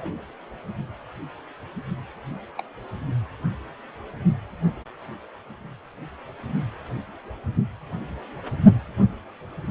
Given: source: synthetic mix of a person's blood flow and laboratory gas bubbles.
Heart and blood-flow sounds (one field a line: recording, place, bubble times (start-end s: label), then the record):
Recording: Doppler ultrasound of blood flow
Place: precordium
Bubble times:
0.00-0.22 s: bubbles
2.56-2.62 s: bubbles
From the record:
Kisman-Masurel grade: 121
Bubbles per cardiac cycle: 1 to 2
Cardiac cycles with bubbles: 10 to 50%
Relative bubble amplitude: barely perceptible (0.100 to 0.250)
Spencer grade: 2 (many but less than half of the cardiac periods contain bubble signals, singularly or in groups)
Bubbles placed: only in the low amplitude regions of the cardiac cycle